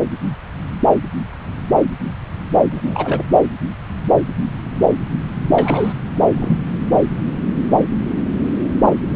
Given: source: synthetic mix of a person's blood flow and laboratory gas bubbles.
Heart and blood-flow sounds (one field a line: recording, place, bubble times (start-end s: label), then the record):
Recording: Doppler ultrasound of blood flow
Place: subclavian vein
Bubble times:
2.72-3.23 s: bubbles
5.52-5.92 s: bubbles
6.08-6.58 s: bubbles
From the record:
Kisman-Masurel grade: 222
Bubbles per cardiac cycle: several, 3 to 8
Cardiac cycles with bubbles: 10 to 50%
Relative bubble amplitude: moderate (0.250 to 0.450)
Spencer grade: 2 (many but less than half of the cardiac periods contain bubble signals, singularly or in groups)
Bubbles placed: anywhere in the cardiac cycle